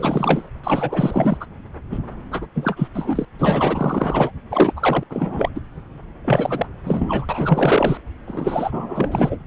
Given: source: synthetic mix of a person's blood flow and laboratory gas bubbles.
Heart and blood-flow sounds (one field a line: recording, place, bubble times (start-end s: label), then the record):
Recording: Doppler ultrasound of blood flow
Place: subclavian vein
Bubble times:
0.00-0.50 s: bubbles
0.63-1.37 s: bubbles
1.40-1.46 s: bubbles
1.91-1.99 s: bubbles
2.31-2.47 s: bubbles
2.54-2.88 s: bubbles
2.94-3.25 s: bubbles
3.38-4.32 s: bubbles
4.50-4.73 s: bubbles
4.76-5.04 s: bubbles
5.09-5.50 s: bubbles
5.54-5.60 s: bubbles
6.25-6.67 s: bubbles
6.84-7.97 s: bubbles
8.27-9.38 s: bubbles
From the record:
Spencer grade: 4 (maximum detectable bubble signal sounding continuously throughout systole and diastole of every cardiac period, and overriding the amplitude of the normal cardiac signals)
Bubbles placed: anywhere in the cardiac cycle